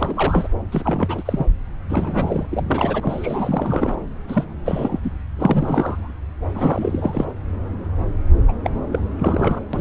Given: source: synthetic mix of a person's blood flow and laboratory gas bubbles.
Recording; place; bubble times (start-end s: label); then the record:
Doppler ultrasound of blood flow; subclavian vein
0.00-0.47 s: bubbles
0.72-1.46 s: bubbles
1.90-3.96 s: bubbles
4.28-4.45 s: bubbles
4.65-5.00 s: bubbles
5.03-5.12 s: bubbles
5.36-6.12 s: bubbles
6.54-7.27 s: bubbles
8.47-8.53 s: bubbles
8.64-8.70 s: bubbles
8.92-9.00 s: bubbles
9.19-9.60 s: bubbles
9.73-9.81 s: bubbles
From the record:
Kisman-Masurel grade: 332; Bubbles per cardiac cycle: rolling drumbeat, 9 or more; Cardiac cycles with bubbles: 50 to 99%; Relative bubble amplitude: moderate (0.250 to 0.450); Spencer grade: 3 (all of the cardiac periods contain showers or single bubble signals, but not dominating or overriding the cardiac motion signals); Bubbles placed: anywhere in the cardiac cycle